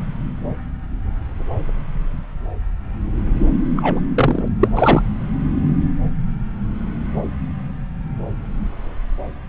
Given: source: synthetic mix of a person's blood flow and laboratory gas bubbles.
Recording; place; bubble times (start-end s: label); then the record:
Doppler ultrasound of blood flow; subclavian vein
3.75-4.00 s: bubbles
4.16-4.48 s: bubbles
4.60-4.68 s: bubbles
4.75-5.01 s: bubbles
From the record:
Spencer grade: 1 (occasional bubble signal discernible with the cardiac motion signal, with majority of cardiac periods free of bubbles); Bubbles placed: anywhere in the cardiac cycle